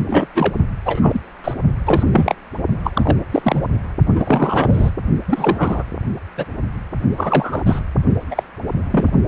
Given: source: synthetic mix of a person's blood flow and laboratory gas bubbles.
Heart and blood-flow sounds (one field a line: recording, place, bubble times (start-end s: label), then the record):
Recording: Doppler ultrasound of blood flow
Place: precordium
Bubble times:
0.07-0.27 s: bubbles
0.34-0.56 s: bubbles
0.85-1.21 s: bubbles
1.44-1.53 s: bubbles
1.85-2.03 s: bubbles
2.12-2.35 s: bubbles
2.83-3.17 s: bubbles
3.31-3.63 s: bubbles
4.15-4.91 s: bubbles
5.28-5.83 s: bubbles
6.37-6.45 s: bubbles
7.17-7.63 s: bubbles
7.66-7.82 s: bubbles
8.30-8.43 s: bubbles
8.90-9.11 s: bubbles
From the record:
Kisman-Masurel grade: 243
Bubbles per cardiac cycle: several, 3 to 8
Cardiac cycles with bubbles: 100%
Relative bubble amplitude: loud (0.450 to 0.775)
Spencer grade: 3 (all of the cardiac periods contain showers or single bubble signals, but not dominating or overriding the cardiac motion signals)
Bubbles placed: only in the low amplitude regions of the cardiac cycle